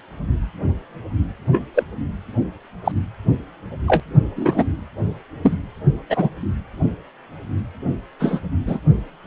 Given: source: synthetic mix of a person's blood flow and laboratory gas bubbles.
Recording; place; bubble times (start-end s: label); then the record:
Doppler ultrasound of blood flow; precordium
1.52-1.63 s: bubbles
1.74-1.83 s: bubbles
2.85-2.92 s: bubbles
3.88-4.00 s: bubbles
4.36-4.64 s: bubbles
5.43-5.58 s: bubbles
6.09-6.30 s: bubbles
8.20-8.39 s: bubbles
8.67-8.79 s: bubbles
From the record:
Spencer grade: 2 (many but less than half of the cardiac periods contain bubble signals, singularly or in groups); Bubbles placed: anywhere in the cardiac cycle